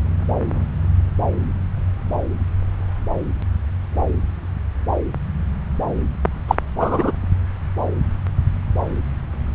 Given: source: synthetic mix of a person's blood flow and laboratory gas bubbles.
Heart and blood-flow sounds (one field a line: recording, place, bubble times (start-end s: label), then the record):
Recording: Doppler ultrasound of blood flow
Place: subclavian vein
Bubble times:
6.48-6.55 s: bubbles
6.79-7.12 s: bubbles
From the record:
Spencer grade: 1 (occasional bubble signal discernible with the cardiac motion signal, with majority of cardiac periods free of bubbles)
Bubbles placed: anywhere in the cardiac cycle